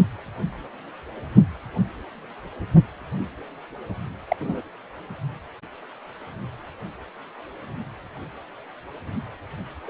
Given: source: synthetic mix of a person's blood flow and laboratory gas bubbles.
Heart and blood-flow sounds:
Doppler ultrasound of blood flow; precordium
4.28-4.36 s: bubbles
4.41-4.61 s: bubbles
9.87-9.90 s: bubbles
From the record:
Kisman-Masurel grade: 122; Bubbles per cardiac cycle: 1 to 2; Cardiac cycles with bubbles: 10 to 50%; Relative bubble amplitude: moderate (0.250 to 0.450); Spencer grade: 2 (many but less than half of the cardiac periods contain bubble signals, singularly or in groups); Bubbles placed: anywhere in the cardiac cycle

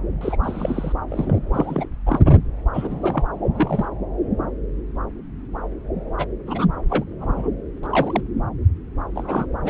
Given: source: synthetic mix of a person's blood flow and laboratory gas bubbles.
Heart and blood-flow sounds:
Doppler ultrasound of blood flow; subclavian vein
0.21-0.37 s: bubbles
0.43-0.93 s: bubbles
1.09-1.39 s: bubbles
1.52-1.88 s: bubbles
2.06-2.20 s: bubbles
2.73-3.26 s: bubbles
3.55-3.89 s: bubbles
6.18-6.25 s: bubbles
6.46-6.67 s: bubbles
6.88-7.04 s: bubbles
7.21-7.50 s: bubbles
7.83-7.87 s: bubbles
7.90-8.21 s: bubbles
9.15-9.46 s: bubbles
9.64-9.70 s: bubbles
From the record:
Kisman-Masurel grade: 232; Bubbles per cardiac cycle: several, 3 to 8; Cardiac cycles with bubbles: 50 to 99%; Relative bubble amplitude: moderate (0.250 to 0.450); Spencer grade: 3 (all of the cardiac periods contain showers or single bubble signals, but not dominating or overriding the cardiac motion signals); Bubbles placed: anywhere in the cardiac cycle

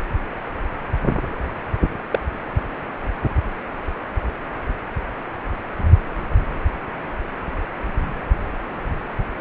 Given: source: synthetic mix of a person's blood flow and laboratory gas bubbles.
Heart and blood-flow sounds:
Doppler ultrasound of blood flow; precordium
2.12-2.19 s: bubbles
From the record:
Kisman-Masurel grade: 112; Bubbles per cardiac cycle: 1 to 2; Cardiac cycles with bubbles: 1 to 10%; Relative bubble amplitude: moderate (0.250 to 0.450); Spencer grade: 1 (occasional bubble signal discernible with the cardiac motion signal, with majority of cardiac periods free of bubbles); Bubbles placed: anywhere in the cardiac cycle

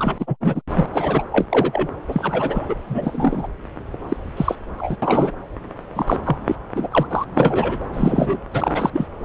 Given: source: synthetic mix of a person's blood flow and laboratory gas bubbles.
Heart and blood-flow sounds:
Doppler ultrasound of blood flow; subclavian vein
0.00-0.15 s: bubbles
0.19-0.35 s: bubbles
0.41-0.61 s: bubbles
0.75-0.85 s: bubbles
0.93-1.23 s: bubbles
1.31-1.48 s: bubbles
1.50-1.88 s: bubbles
2.08-2.75 s: bubbles
2.89-3.48 s: bubbles
4.08-4.17 s: bubbles
4.37-4.55 s: bubbles
4.77-4.96 s: bubbles
5.02-5.32 s: bubbles
5.95-6.17 s: bubbles
6.24-6.37 s: bubbles
6.46-6.55 s: bubbles
6.75-6.88 s: bubbles
6.91-7.07 s: bubbles
7.10-7.25 s: bubbles
7.33-7.79 s: bubbles
7.93-8.38 s: bubbles
8.51-8.90 s: bubbles
8.93-9.07 s: bubbles
From the record:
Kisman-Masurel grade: 243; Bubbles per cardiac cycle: several, 3 to 8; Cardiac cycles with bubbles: 100%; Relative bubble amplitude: loud (0.450 to 0.775); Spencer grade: 3 (all of the cardiac periods contain showers or single bubble signals, but not dominating or overriding the cardiac motion signals); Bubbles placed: anywhere in the cardiac cycle

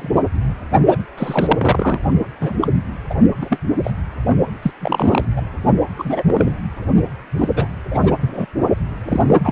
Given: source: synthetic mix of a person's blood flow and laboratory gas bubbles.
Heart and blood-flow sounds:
Doppler ultrasound of blood flow; precordium
0.00-0.09 s: bubbles
0.91-0.98 s: bubbles
1.17-2.00 s: bubbles
2.41-2.54 s: bubbles
2.62-2.68 s: bubbles
3.10-3.15 s: bubbles
3.41-3.58 s: bubbles
3.83-3.91 s: bubbles
4.62-4.71 s: bubbles
4.79-5.25 s: bubbles
5.36-5.42 s: bubbles
5.96-6.23 s: bubbles
6.26-6.52 s: bubbles
7.38-7.49 s: bubbles
7.55-7.67 s: bubbles
7.91-8.16 s: bubbles
8.19-8.46 s: bubbles
9.05-9.21 s: bubbles
9.27-9.37 s: bubbles
9.43-9.52 s: bubbles
From the record:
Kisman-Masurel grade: 242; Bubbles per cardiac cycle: several, 3 to 8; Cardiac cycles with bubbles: 100%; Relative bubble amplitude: moderate (0.250 to 0.450); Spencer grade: 3 (all of the cardiac periods contain showers or single bubble signals, but not dominating or overriding the cardiac motion signals); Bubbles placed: only in the low amplitude regions of the cardiac cycle

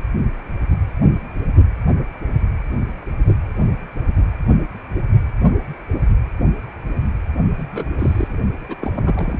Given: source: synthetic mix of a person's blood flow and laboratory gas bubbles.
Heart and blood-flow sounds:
Doppler ultrasound of blood flow; precordium
7.56-7.91 s: bubbles
7.99-8.38 s: bubbles
8.60-8.75 s: bubbles
8.81-9.40 s: bubbles
From the record:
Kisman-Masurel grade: 221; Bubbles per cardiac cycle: several, 3 to 8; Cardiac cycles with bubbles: 10 to 50%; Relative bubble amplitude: barely perceptible (0.100 to 0.250); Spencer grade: 2 (many but less than half of the cardiac periods contain bubble signals, singularly or in groups); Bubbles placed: only in the low amplitude regions of the cardiac cycle

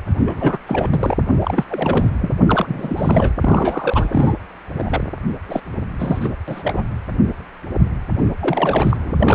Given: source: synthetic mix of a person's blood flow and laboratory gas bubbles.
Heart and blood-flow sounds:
Doppler ultrasound of blood flow; precordium
0.25-0.58 s: bubbles
0.67-1.17 s: bubbles
1.41-1.65 s: bubbles
1.68-2.31 s: bubbles
2.46-3.34 s: bubbles
3.40-4.34 s: bubbles
4.76-5.04 s: bubbles
5.49-5.60 s: bubbles
5.99-6.29 s: bubbles
6.47-6.84 s: bubbles
8.18-8.23 s: bubbles
8.40-9.12 s: bubbles
9.19-9.35 s: bubbles
From the record:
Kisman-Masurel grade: 332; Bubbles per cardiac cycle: rolling drumbeat, 9 or more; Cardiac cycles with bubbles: 50 to 99%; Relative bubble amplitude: moderate (0.250 to 0.450); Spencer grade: 3 (all of the cardiac periods contain showers or single bubble signals, but not dominating or overriding the cardiac motion signals); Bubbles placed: anywhere in the cardiac cycle

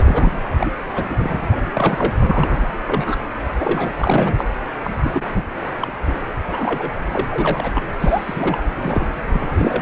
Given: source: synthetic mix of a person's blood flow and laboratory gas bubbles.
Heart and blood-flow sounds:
Doppler ultrasound of blood flow; precordium
0.00-0.32 s: bubbles
0.59-0.70 s: bubbles
0.93-1.04 s: bubbles
1.08-1.16 s: bubbles
1.19-1.60 s: bubbles
1.74-2.14 s: bubbles
2.20-2.69 s: bubbles
2.87-3.17 s: bubbles
3.48-3.52 s: bubbles
3.60-3.92 s: bubbles
3.98-4.45 s: bubbles
4.84-4.91 s: bubbles
5.04-5.22 s: bubbles
5.30-5.44 s: bubbles
5.83-5.92 s: bubbles
6.07-6.18 s: bubbles
6.47-6.92 s: bubbles
7.12-7.24 s: bubbles
7.30-7.83 s: bubbles
8.00-8.62 s: bubbles
8.74-9.11 s: bubbles
9.31-9.82 s: bubbles
From the record:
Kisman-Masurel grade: 242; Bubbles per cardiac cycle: several, 3 to 8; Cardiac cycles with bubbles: 100%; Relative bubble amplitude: moderate (0.250 to 0.450); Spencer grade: 3 (all of the cardiac periods contain showers or single bubble signals, but not dominating or overriding the cardiac motion signals); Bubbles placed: anywhere in the cardiac cycle

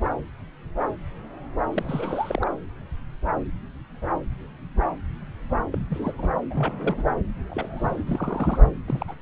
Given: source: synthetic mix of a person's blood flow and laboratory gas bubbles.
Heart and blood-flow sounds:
Doppler ultrasound of blood flow; subclavian vein
1.72-2.51 s: bubbles
5.71-5.75 s: bubbles
5.89-6.13 s: bubbles
6.18-6.29 s: bubbles
6.50-7.04 s: bubbles
7.50-8.04 s: bubbles
8.06-8.62 s: bubbles
8.87-9.05 s: bubbles
9.08-9.13 s: bubbles
From the record:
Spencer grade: 2 (many but less than half of the cardiac periods contain bubble signals, singularly or in groups); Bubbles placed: anywhere in the cardiac cycle

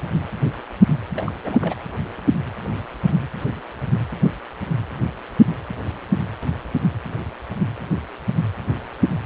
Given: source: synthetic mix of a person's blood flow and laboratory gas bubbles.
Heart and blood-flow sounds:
Doppler ultrasound of blood flow; precordium
1.14-1.32 s: bubbles
1.42-1.58 s: bubbles
1.61-1.74 s: bubbles
From the record:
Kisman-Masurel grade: 211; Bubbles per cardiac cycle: several, 3 to 8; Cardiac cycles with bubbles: 1 to 10%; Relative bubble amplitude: barely perceptible (0.100 to 0.250); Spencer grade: 1 (occasional bubble signal discernible with the cardiac motion signal, with majority of cardiac periods free of bubbles); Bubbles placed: anywhere in the cardiac cycle

